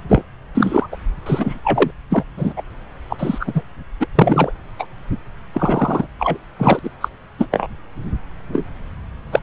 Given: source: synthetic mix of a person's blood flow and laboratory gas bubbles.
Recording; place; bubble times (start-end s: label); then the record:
Doppler ultrasound of blood flow; subclavian vein
0.08-0.23 s: bubbles
0.54-0.86 s: bubbles
0.91-0.96 s: bubbles
1.26-1.58 s: bubbles
1.64-1.91 s: bubbles
2.10-2.24 s: bubbles
2.37-2.54 s: bubbles
2.56-2.63 s: bubbles
3.08-3.17 s: bubbles
3.19-3.62 s: bubbles
3.99-4.08 s: bubbles
4.15-4.52 s: bubbles
4.79-4.86 s: bubbles
5.53-6.07 s: bubbles
6.18-6.38 s: bubbles
6.58-6.79 s: bubbles
6.83-6.90 s: bubbles
7.00-7.08 s: bubbles
7.38-7.46 s: bubbles
7.51-7.67 s: bubbles
8.53-8.65 s: bubbles
9.31-9.40 s: bubbles
From the record:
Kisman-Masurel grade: 233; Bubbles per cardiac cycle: several, 3 to 8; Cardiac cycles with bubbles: 50 to 99%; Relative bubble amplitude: loud (0.450 to 0.775); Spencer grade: 3 (all of the cardiac periods contain showers or single bubble signals, but not dominating or overriding the cardiac motion signals); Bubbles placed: anywhere in the cardiac cycle